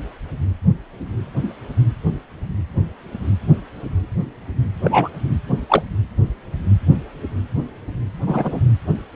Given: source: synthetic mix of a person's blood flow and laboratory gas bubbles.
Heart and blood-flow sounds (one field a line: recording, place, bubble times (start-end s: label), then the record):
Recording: Doppler ultrasound of blood flow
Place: precordium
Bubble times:
4.83-5.09 s: bubbles
5.69-5.83 s: bubbles
8.26-8.60 s: bubbles
From the record:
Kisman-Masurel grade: 123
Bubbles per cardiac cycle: 1 to 2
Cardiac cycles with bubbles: 10 to 50%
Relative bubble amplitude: loud (0.450 to 0.775)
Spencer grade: 2 (many but less than half of the cardiac periods contain bubble signals, singularly or in groups)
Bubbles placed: anywhere in the cardiac cycle